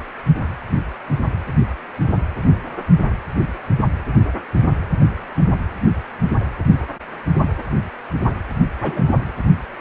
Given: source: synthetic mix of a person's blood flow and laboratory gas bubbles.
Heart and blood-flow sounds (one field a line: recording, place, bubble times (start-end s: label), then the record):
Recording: Doppler ultrasound of blood flow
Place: precordium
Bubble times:
8.82-9.04 s: bubbles
From the record:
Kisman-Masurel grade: 112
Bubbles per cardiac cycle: 1 to 2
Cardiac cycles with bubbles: 1 to 10%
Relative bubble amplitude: moderate (0.250 to 0.450)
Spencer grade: 1 (occasional bubble signal discernible with the cardiac motion signal, with majority of cardiac periods free of bubbles)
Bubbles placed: anywhere in the cardiac cycle